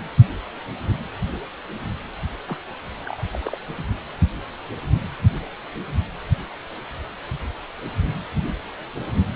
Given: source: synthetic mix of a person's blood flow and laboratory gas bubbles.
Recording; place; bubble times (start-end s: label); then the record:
Doppler ultrasound of blood flow; precordium
2.48-2.58 s: bubbles
3.06-3.23 s: bubbles
3.33-3.56 s: bubbles
3.66-3.85 s: bubbles
From the record:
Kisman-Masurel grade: 211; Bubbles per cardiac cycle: several, 3 to 8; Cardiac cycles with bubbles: 1 to 10%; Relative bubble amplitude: barely perceptible (0.100 to 0.250); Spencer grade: 1 (occasional bubble signal discernible with the cardiac motion signal, with majority of cardiac periods free of bubbles); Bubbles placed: anywhere in the cardiac cycle